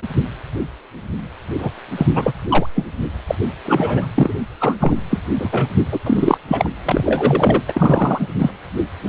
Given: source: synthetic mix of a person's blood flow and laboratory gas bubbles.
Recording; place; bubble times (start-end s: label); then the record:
Doppler ultrasound of blood flow; precordium
1.58-1.70 s: bubbles
1.97-2.06 s: bubbles
2.15-2.32 s: bubbles
2.48-2.67 s: bubbles
2.75-2.85 s: bubbles
3.27-3.35 s: bubbles
3.65-4.06 s: bubbles
4.14-4.33 s: bubbles
4.60-4.76 s: bubbles
4.80-5.02 s: bubbles
5.10-5.19 s: bubbles
5.35-5.69 s: bubbles
5.92-5.98 s: bubbles
6.04-6.38 s: bubbles
6.48-6.70 s: bubbles
6.85-7.62 s: bubbles
7.67-8.33 s: bubbles
8.39-8.51 s: bubbles
From the record:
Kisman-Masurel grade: 233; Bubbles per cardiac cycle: several, 3 to 8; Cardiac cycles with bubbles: 50 to 99%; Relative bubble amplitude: loud (0.450 to 0.775); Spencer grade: 3 (all of the cardiac periods contain showers or single bubble signals, but not dominating or overriding the cardiac motion signals); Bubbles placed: anywhere in the cardiac cycle